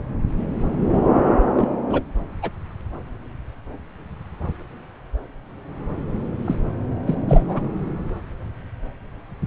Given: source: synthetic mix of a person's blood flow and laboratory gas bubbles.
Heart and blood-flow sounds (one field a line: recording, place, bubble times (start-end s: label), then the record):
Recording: Doppler ultrasound of blood flow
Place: subclavian vein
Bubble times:
1.56-1.69 s: bubbles
1.90-2.01 s: bubbles
2.42-2.50 s: bubbles
6.45-6.55 s: bubbles
7.06-7.15 s: bubbles
7.29-7.62 s: bubbles
From the record:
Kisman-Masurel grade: 213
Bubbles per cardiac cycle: several, 3 to 8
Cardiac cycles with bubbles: 1 to 10%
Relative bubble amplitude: loud (0.450 to 0.775)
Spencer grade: 1 (occasional bubble signal discernible with the cardiac motion signal, with majority of cardiac periods free of bubbles)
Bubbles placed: anywhere in the cardiac cycle